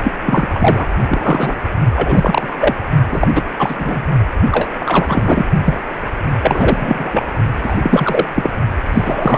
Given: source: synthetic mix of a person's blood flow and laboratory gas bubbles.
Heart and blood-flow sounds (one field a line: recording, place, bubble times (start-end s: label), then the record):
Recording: Doppler ultrasound of blood flow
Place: precordium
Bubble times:
0.04-0.11 s: bubbles
0.26-0.48 s: bubbles
0.54-0.86 s: bubbles
1.07-1.56 s: bubbles
1.96-2.74 s: bubbles
3.11-3.27 s: bubbles
3.35-3.42 s: bubbles
3.58-3.76 s: bubbles
3.79-4.05 s: bubbles
4.51-4.70 s: bubbles
4.79-5.45 s: bubbles
5.65-5.81 s: bubbles
6.42-7.23 s: bubbles
7.62-7.78 s: bubbles
7.82-8.25 s: bubbles
8.36-8.50 s: bubbles
8.92-9.38 s: bubbles
From the record:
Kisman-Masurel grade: 343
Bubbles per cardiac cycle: rolling drumbeat, 9 or more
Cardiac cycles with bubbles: 100%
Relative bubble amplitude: loud (0.450 to 0.775)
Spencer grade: 3 (all of the cardiac periods contain showers or single bubble signals, but not dominating or overriding the cardiac motion signals)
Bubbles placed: only in the low amplitude regions of the cardiac cycle